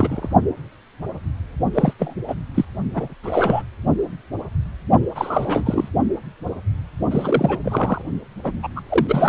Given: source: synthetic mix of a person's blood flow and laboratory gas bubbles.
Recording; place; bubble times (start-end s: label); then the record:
Doppler ultrasound of blood flow; precordium
0.00-0.29 s: bubbles
1.74-1.93 s: bubbles
1.99-2.14 s: bubbles
2.28-2.34 s: bubbles
2.54-2.65 s: bubbles
2.94-3.14 s: bubbles
3.23-3.62 s: bubbles
5.15-5.88 s: bubbles
7.10-7.59 s: bubbles
7.63-8.02 s: bubbles
8.44-8.53 s: bubbles
8.62-8.68 s: bubbles
8.76-8.81 s: bubbles
8.89-9.29 s: bubbles
From the record:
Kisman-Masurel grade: 333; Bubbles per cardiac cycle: rolling drumbeat, 9 or more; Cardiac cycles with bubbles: 50 to 99%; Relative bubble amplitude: loud (0.450 to 0.775); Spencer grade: 3 (all of the cardiac periods contain showers or single bubble signals, but not dominating or overriding the cardiac motion signals); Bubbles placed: only in the low amplitude regions of the cardiac cycle